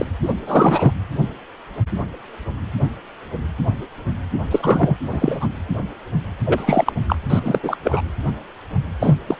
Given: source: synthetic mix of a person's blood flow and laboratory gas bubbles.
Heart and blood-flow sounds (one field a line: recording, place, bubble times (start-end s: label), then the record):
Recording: Doppler ultrasound of blood flow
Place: precordium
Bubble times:
0.00-0.05 s: bubbles
0.22-0.33 s: bubbles
0.46-0.92 s: bubbles
4.50-4.96 s: bubbles
5.10-5.47 s: bubbles
6.46-6.92 s: bubbles
7.07-7.16 s: bubbles
7.29-7.41 s: bubbles
7.44-7.60 s: bubbles
7.62-7.77 s: bubbles
7.83-8.02 s: bubbles
9.00-9.15 s: bubbles
9.27-9.36 s: bubbles
From the record:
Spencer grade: 3 (all of the cardiac periods contain showers or single bubble signals, but not dominating or overriding the cardiac motion signals)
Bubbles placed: anywhere in the cardiac cycle